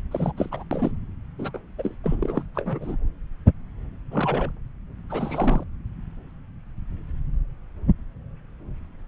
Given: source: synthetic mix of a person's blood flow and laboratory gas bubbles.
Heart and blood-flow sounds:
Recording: Doppler ultrasound of blood flow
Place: subclavian vein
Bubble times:
0.11-0.32 s: bubbles
0.36-0.63 s: bubbles
0.71-0.91 s: bubbles
1.39-1.59 s: bubbles
1.78-1.95 s: bubbles
2.03-2.44 s: bubbles
2.55-2.97 s: bubbles
4.11-4.51 s: bubbles
5.10-5.64 s: bubbles
From the record:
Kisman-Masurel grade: 221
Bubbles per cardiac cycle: several, 3 to 8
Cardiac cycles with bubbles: 10 to 50%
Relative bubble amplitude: barely perceptible (0.100 to 0.250)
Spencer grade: 2 (many but less than half of the cardiac periods contain bubble signals, singularly or in groups)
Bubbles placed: anywhere in the cardiac cycle

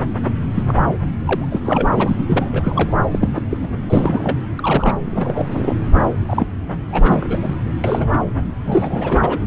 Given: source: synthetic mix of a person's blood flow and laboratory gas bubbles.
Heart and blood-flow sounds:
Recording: Doppler ultrasound of blood flow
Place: subclavian vein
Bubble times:
0.54-0.64 s: bubbles
0.68-0.74 s: bubbles
1.23-1.59 s: bubbles
1.65-1.88 s: bubbles
1.94-2.17 s: bubbles
2.27-2.94 s: bubbles
3.11-3.29 s: bubbles
3.34-3.38 s: bubbles
3.50-3.58 s: bubbles
3.61-3.69 s: bubbles
3.88-4.39 s: bubbles
4.58-5.75 s: bubbles
6.29-6.47 s: bubbles
6.88-7.55 s: bubbles
7.83-8.09 s: bubbles
8.66-9.38 s: bubbles
From the record:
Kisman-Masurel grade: 332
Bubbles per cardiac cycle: rolling drumbeat, 9 or more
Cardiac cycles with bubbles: 50 to 99%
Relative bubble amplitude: moderate (0.250 to 0.450)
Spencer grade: 3 (all of the cardiac periods contain showers or single bubble signals, but not dominating or overriding the cardiac motion signals)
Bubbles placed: anywhere in the cardiac cycle

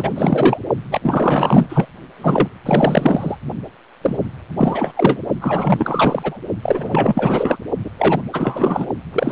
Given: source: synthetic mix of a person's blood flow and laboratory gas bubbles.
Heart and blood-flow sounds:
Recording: Doppler ultrasound of blood flow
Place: precordium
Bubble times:
0.00-0.59 s: bubbles
0.91-1.88 s: bubbles
2.17-2.59 s: bubbles
2.65-3.36 s: bubbles
4.02-4.18 s: bubbles
4.57-5.21 s: bubbles
5.41-6.38 s: bubbles
6.62-7.57 s: bubbles
7.84-7.91 s: bubbles
7.98-8.22 s: bubbles
8.32-8.86 s: bubbles
9.12-9.32 s: bubbles
From the record:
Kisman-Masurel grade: 444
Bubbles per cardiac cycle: continuous sound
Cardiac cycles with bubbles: 100%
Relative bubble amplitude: maximal (0.775 to 0.999)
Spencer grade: 4 (maximum detectable bubble signal sounding continuously throughout systole and diastole of every cardiac period, and overriding the amplitude of the normal cardiac signals)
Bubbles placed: only in the low amplitude regions of the cardiac cycle

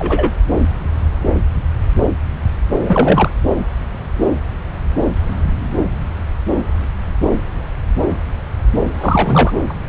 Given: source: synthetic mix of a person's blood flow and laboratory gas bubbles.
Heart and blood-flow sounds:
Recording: Doppler ultrasound of blood flow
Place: subclavian vein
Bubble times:
0.00-0.32 s: bubbles
2.84-3.30 s: bubbles
9.00-9.56 s: bubbles
9.69-9.73 s: bubbles
9.87-9.89 s: bubbles
From the record:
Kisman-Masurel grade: 223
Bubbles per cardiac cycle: several, 3 to 8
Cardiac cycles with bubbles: 10 to 50%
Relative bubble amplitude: loud (0.450 to 0.775)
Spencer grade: 2 (many but less than half of the cardiac periods contain bubble signals, singularly or in groups)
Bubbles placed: anywhere in the cardiac cycle

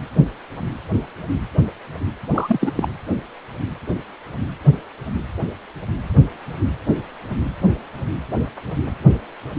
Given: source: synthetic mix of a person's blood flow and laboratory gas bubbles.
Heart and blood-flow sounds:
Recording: Doppler ultrasound of blood flow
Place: precordium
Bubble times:
2.33-2.72 s: bubbles
2.75-2.88 s: bubbles
From the record:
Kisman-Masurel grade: 212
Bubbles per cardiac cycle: several, 3 to 8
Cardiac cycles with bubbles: 1 to 10%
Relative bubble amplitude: moderate (0.250 to 0.450)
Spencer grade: 1 (occasional bubble signal discernible with the cardiac motion signal, with majority of cardiac periods free of bubbles)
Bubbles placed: anywhere in the cardiac cycle

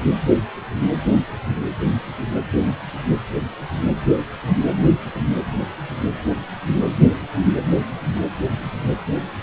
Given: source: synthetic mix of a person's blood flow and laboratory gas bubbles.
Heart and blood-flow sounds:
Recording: Doppler ultrasound of blood flow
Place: precordium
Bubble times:
no bubbles
From the record:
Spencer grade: 0 (complete lack of bubble signals)

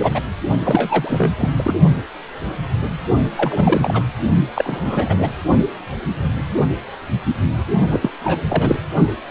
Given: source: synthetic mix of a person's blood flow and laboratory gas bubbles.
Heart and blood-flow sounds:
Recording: Doppler ultrasound of blood flow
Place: precordium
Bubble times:
0.00-0.21 s: bubbles
0.63-1.35 s: bubbles
1.38-1.50 s: bubbles
1.58-1.74 s: bubbles
3.36-4.05 s: bubbles
4.54-5.30 s: bubbles
7.90-8.10 s: bubbles
8.20-8.43 s: bubbles
8.48-8.78 s: bubbles
From the record:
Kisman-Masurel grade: 333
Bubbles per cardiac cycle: rolling drumbeat, 9 or more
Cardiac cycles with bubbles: 50 to 99%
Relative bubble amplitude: loud (0.450 to 0.775)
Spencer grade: 3 (all of the cardiac periods contain showers or single bubble signals, but not dominating or overriding the cardiac motion signals)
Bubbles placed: only in the low amplitude regions of the cardiac cycle

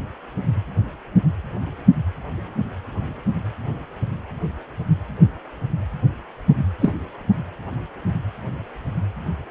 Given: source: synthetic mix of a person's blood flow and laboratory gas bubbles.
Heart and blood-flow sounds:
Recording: Doppler ultrasound of blood flow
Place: precordium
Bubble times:
6.81-6.94 s: bubbles
From the record:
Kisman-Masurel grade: 123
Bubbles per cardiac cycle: 1 to 2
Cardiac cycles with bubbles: 10 to 50%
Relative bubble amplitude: loud (0.450 to 0.775)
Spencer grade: 2 (many but less than half of the cardiac periods contain bubble signals, singularly or in groups)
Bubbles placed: anywhere in the cardiac cycle

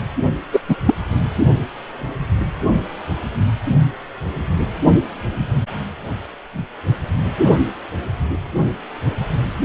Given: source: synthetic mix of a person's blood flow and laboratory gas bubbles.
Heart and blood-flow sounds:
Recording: Doppler ultrasound of blood flow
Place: precordium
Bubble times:
0.52-0.60 s: bubbles
0.68-0.76 s: bubbles
0.85-0.94 s: bubbles
From the record:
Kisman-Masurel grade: 213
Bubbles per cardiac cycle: several, 3 to 8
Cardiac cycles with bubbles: 1 to 10%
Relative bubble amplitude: loud (0.450 to 0.775)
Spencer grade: 1 (occasional bubble signal discernible with the cardiac motion signal, with majority of cardiac periods free of bubbles)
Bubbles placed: only in the low amplitude regions of the cardiac cycle

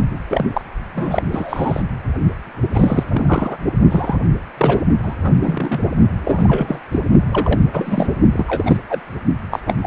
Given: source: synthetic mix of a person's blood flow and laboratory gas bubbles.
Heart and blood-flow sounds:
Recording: Doppler ultrasound of blood flow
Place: precordium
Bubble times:
0.28-0.46 s: bubbles
0.53-0.61 s: bubbles
0.94-1.25 s: bubbles
1.31-1.83 s: bubbles
2.73-3.04 s: bubbles
3.11-3.57 s: bubbles
3.90-4.17 s: bubbles
4.58-4.83 s: bubbles
5.03-5.15 s: bubbles
5.24-5.31 s: bubbles
5.42-5.80 s: bubbles
6.25-6.82 s: bubbles
6.92-6.99 s: bubbles
7.31-7.60 s: bubbles
7.73-8.08 s: bubbles
8.32-8.77 s: bubbles
8.89-9.02 s: bubbles
9.50-9.60 s: bubbles
9.66-9.74 s: bubbles
9.81-9.87 s: bubbles
From the record:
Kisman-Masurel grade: 242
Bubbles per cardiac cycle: several, 3 to 8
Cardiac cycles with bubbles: 100%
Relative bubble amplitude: moderate (0.250 to 0.450)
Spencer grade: 3 (all of the cardiac periods contain showers or single bubble signals, but not dominating or overriding the cardiac motion signals)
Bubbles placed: only in the low amplitude regions of the cardiac cycle

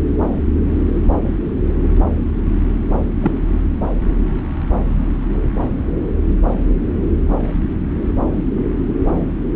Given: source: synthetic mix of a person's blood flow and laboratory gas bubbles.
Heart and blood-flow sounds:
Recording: Doppler ultrasound of blood flow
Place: subclavian vein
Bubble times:
3.22-3.33 s: bubbles
From the record:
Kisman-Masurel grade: 113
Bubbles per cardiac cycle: 1 to 2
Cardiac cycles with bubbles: 1 to 10%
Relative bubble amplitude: loud (0.450 to 0.775)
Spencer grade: 1 (occasional bubble signal discernible with the cardiac motion signal, with majority of cardiac periods free of bubbles)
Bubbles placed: anywhere in the cardiac cycle

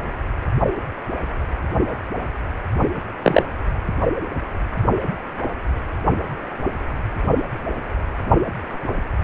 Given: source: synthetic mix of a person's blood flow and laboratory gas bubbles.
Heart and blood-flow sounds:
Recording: Doppler ultrasound of blood flow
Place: precordium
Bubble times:
3.23-3.42 s: bubbles
From the record:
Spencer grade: 1 (occasional bubble signal discernible with the cardiac motion signal, with majority of cardiac periods free of bubbles)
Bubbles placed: only in the low amplitude regions of the cardiac cycle

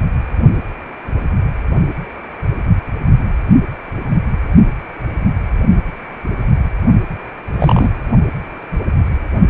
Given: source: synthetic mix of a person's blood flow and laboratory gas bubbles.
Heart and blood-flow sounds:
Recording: Doppler ultrasound of blood flow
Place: precordium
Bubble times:
7.57-7.91 s: bubbles
From the record:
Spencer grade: 2 (many but less than half of the cardiac periods contain bubble signals, singularly or in groups)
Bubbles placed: only in the low amplitude regions of the cardiac cycle

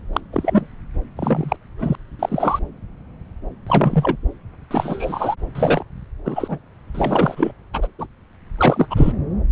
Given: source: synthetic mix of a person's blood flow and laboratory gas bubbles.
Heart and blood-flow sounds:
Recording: Doppler ultrasound of blood flow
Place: subclavian vein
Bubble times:
0.13-0.20 s: bubbles
0.33-0.68 s: bubbles
1.17-1.56 s: bubbles
1.79-1.96 s: bubbles
2.19-2.59 s: bubbles
3.67-4.17 s: bubbles
4.71-5.35 s: bubbles
5.55-5.83 s: bubbles
6.24-6.60 s: bubbles
6.95-7.52 s: bubbles
7.74-7.88 s: bubbles
7.99-8.06 s: bubbles
8.57-8.88 s: bubbles
8.90-9.12 s: bubbles
From the record:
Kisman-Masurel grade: 233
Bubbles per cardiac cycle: several, 3 to 8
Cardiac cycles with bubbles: 50 to 99%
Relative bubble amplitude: loud (0.450 to 0.775)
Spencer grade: 3 (all of the cardiac periods contain showers or single bubble signals, but not dominating or overriding the cardiac motion signals)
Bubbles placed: anywhere in the cardiac cycle

